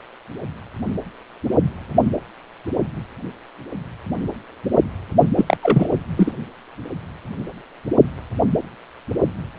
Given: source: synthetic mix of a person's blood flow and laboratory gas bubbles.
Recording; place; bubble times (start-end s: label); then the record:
Doppler ultrasound of blood flow; precordium
5.36-5.57 s: bubbles
5.62-5.88 s: bubbles
6.17-6.32 s: bubbles
From the record:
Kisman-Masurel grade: 213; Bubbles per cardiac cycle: several, 3 to 8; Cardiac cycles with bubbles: 1 to 10%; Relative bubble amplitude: loud (0.450 to 0.775); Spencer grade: 1 (occasional bubble signal discernible with the cardiac motion signal, with majority of cardiac periods free of bubbles); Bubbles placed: only in the low amplitude regions of the cardiac cycle